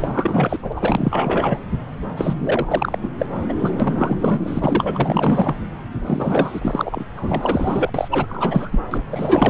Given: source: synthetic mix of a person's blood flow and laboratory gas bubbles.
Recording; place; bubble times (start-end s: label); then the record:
Doppler ultrasound of blood flow; subclavian vein
0.00-0.58 s: bubbles
0.61-0.73 s: bubbles
0.75-1.60 s: bubbles
2.16-2.98 s: bubbles
3.02-3.10 s: bubbles
3.18-3.26 s: bubbles
3.48-3.54 s: bubbles
3.58-3.71 s: bubbles
3.79-4.17 s: bubbles
4.20-5.57 s: bubbles
6.06-7.04 s: bubbles
7.16-7.91 s: bubbles
7.94-8.08 s: bubbles
8.11-8.82 s: bubbles
8.91-9.03 s: bubbles
9.11-9.50 s: bubbles
From the record:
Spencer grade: 4 (maximum detectable bubble signal sounding continuously throughout systole and diastole of every cardiac period, and overriding the amplitude of the normal cardiac signals); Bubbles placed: anywhere in the cardiac cycle